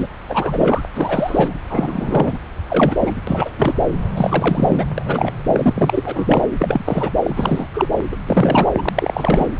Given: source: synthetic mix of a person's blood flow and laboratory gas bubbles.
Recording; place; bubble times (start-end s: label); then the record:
Doppler ultrasound of blood flow; subclavian vein
0.00-0.07 s: bubbles
0.28-0.81 s: bubbles
0.95-1.54 s: bubbles
1.69-2.38 s: bubbles
2.69-2.96 s: bubbles
3.00-3.12 s: bubbles
3.27-3.50 s: bubbles
3.57-3.74 s: bubbles
4.14-4.85 s: bubbles
4.98-5.32 s: bubbles
5.47-6.47 s: bubbles
6.54-7.12 s: bubbles
7.23-7.68 s: bubbles
7.74-7.89 s: bubbles
8.11-8.16 s: bubbles
8.25-8.70 s: bubbles
8.77-8.89 s: bubbles
8.95-9.46 s: bubbles
From the record:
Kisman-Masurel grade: 343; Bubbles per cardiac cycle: rolling drumbeat, 9 or more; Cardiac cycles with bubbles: 100%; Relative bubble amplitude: loud (0.450 to 0.775); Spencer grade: 3 (all of the cardiac periods contain showers or single bubble signals, but not dominating or overriding the cardiac motion signals); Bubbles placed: anywhere in the cardiac cycle